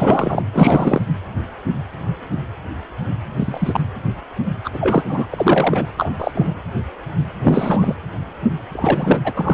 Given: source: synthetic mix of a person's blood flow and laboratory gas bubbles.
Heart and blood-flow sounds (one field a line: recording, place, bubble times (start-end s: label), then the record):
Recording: Doppler ultrasound of blood flow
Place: precordium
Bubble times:
0.00-0.44 s: bubbles
0.53-1.02 s: bubbles
3.36-3.85 s: bubbles
4.64-4.70 s: bubbles
4.74-5.03 s: bubbles
5.06-5.28 s: bubbles
5.30-5.87 s: bubbles
5.97-6.15 s: bubbles
6.19-6.31 s: bubbles
6.34-6.54 s: bubbles
7.43-7.95 s: bubbles
8.72-9.19 s: bubbles
9.24-9.33 s: bubbles
9.37-9.54 s: bubbles
From the record:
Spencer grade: 3 (all of the cardiac periods contain showers or single bubble signals, but not dominating or overriding the cardiac motion signals)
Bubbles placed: anywhere in the cardiac cycle